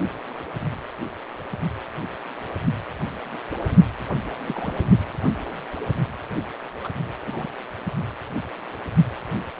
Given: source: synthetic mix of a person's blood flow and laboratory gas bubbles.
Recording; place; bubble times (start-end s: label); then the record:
Doppler ultrasound of blood flow; precordium
4.44-4.73 s: bubbles
6.83-6.89 s: bubbles
7.24-7.48 s: bubbles
From the record:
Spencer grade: 2 (many but less than half of the cardiac periods contain bubble signals, singularly or in groups); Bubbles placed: only in the low amplitude regions of the cardiac cycle